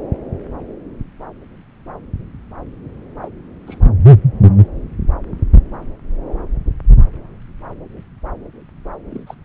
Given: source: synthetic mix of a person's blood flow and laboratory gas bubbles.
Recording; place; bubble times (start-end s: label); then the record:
Doppler ultrasound of blood flow; subclavian vein
3.22-3.28 s: bubbles
3.67-3.77 s: bubbles
9.09-9.23 s: bubbles
9.26-9.34 s: bubbles
From the record:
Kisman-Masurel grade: 121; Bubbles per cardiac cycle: 1 to 2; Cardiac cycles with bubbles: 10 to 50%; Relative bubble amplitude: barely perceptible (0.100 to 0.250); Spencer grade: 2 (many but less than half of the cardiac periods contain bubble signals, singularly or in groups); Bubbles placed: anywhere in the cardiac cycle